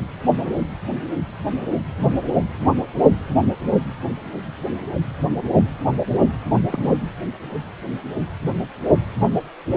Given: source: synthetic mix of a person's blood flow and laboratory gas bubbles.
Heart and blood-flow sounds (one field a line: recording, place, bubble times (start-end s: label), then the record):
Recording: Doppler ultrasound of blood flow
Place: precordium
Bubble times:
6.68-6.94 s: bubbles
From the record:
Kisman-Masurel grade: 121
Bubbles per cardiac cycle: 1 to 2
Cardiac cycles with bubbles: 10 to 50%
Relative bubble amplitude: barely perceptible (0.100 to 0.250)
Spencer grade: 2 (many but less than half of the cardiac periods contain bubble signals, singularly or in groups)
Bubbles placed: anywhere in the cardiac cycle